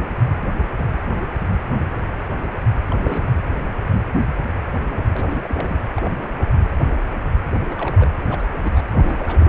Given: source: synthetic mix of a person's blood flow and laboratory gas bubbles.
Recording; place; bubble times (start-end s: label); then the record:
Doppler ultrasound of blood flow; precordium
2.88-3.31 s: bubbles
5.12-5.77 s: bubbles
5.96-6.09 s: bubbles
7.52-7.57 s: bubbles
7.70-8.08 s: bubbles
8.24-8.48 s: bubbles
8.54-8.82 s: bubbles
8.94-9.49 s: bubbles
From the record:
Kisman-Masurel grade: 221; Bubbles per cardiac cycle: several, 3 to 8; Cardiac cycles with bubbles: 10 to 50%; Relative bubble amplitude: barely perceptible (0.100 to 0.250); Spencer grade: 2 (many but less than half of the cardiac periods contain bubble signals, singularly or in groups); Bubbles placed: anywhere in the cardiac cycle